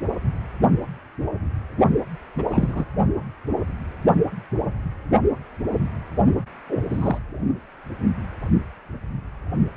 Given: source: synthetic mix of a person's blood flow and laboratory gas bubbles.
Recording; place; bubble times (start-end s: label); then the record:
Doppler ultrasound of blood flow; precordium
2.38-2.44 s: bubbles
2.48-2.85 s: bubbles
6.69-6.85 s: bubbles
6.89-7.19 s: bubbles
From the record:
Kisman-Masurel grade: 222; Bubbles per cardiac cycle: several, 3 to 8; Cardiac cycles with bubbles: 10 to 50%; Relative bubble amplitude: moderate (0.250 to 0.450); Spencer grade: 2 (many but less than half of the cardiac periods contain bubble signals, singularly or in groups); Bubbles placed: only in the low amplitude regions of the cardiac cycle